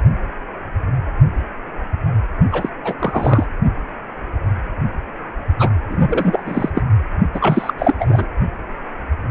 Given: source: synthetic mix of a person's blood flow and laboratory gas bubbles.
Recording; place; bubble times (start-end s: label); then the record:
Doppler ultrasound of blood flow; precordium
2.52-2.69 s: bubbles
2.84-2.94 s: bubbles
2.99-3.46 s: bubbles
5.59-5.70 s: bubbles
5.87-6.42 s: bubbles
6.46-6.70 s: bubbles
6.75-6.81 s: bubbles
7.33-7.74 s: bubbles
7.78-7.95 s: bubbles
7.99-8.28 s: bubbles
From the record:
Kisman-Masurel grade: 333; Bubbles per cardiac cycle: rolling drumbeat, 9 or more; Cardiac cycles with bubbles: 50 to 99%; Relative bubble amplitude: loud (0.450 to 0.775); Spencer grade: 3 (all of the cardiac periods contain showers or single bubble signals, but not dominating or overriding the cardiac motion signals); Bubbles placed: only in the low amplitude regions of the cardiac cycle